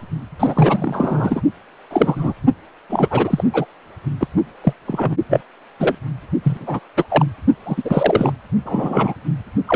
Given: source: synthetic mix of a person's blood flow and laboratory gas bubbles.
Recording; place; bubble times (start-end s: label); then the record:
Doppler ultrasound of blood flow; precordium
0.40-1.41 s: bubbles
1.90-2.33 s: bubbles
2.90-3.44 s: bubbles
3.52-3.65 s: bubbles
4.20-4.28 s: bubbles
4.63-4.73 s: bubbles
4.87-5.15 s: bubbles
5.29-5.41 s: bubbles
5.79-5.95 s: bubbles
6.44-6.79 s: bubbles
6.97-7.05 s: bubbles
7.10-7.25 s: bubbles
7.65-8.33 s: bubbles
8.65-9.14 s: bubbles
9.68-9.76 s: bubbles
From the record:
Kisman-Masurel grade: 243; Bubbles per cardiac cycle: several, 3 to 8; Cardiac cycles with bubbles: 100%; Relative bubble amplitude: loud (0.450 to 0.775); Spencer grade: 3 (all of the cardiac periods contain showers or single bubble signals, but not dominating or overriding the cardiac motion signals); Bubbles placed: only in the low amplitude regions of the cardiac cycle